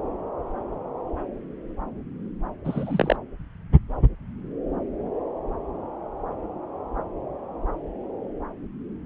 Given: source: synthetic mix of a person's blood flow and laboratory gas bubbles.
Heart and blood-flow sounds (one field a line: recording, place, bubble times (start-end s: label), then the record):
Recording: Doppler ultrasound of blood flow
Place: subclavian vein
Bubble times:
2.64-3.16 s: bubbles
From the record:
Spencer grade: 1 (occasional bubble signal discernible with the cardiac motion signal, with majority of cardiac periods free of bubbles)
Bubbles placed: anywhere in the cardiac cycle